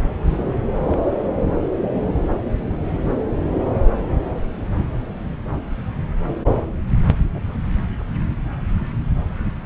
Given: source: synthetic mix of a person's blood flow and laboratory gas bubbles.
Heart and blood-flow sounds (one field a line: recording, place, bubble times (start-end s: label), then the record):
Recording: Doppler ultrasound of blood flow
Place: subclavian vein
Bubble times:
0.25-0.61 s: bubbles
0.74-1.00 s: bubbles
From the record:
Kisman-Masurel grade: 211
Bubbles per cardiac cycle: several, 3 to 8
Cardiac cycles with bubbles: 1 to 10%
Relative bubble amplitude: barely perceptible (0.100 to 0.250)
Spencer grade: 1 (occasional bubble signal discernible with the cardiac motion signal, with majority of cardiac periods free of bubbles)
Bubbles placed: anywhere in the cardiac cycle